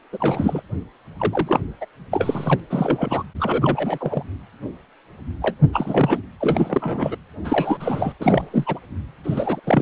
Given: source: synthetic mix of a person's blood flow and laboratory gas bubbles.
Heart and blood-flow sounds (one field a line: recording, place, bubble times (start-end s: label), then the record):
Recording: Doppler ultrasound of blood flow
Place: precordium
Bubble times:
0.12-0.61 s: bubbles
1.17-1.66 s: bubbles
1.81-1.86 s: bubbles
2.11-2.60 s: bubbles
2.70-3.24 s: bubbles
3.40-4.24 s: bubbles
5.42-5.57 s: bubbles
5.73-6.19 s: bubbles
6.40-7.16 s: bubbles
7.45-8.13 s: bubbles
8.20-8.79 s: bubbles
9.23-9.61 s: bubbles
9.64-9.82 s: bubbles
From the record:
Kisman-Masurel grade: 333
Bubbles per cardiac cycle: rolling drumbeat, 9 or more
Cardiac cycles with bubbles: 50 to 99%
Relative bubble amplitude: loud (0.450 to 0.775)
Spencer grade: 3 (all of the cardiac periods contain showers or single bubble signals, but not dominating or overriding the cardiac motion signals)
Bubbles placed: anywhere in the cardiac cycle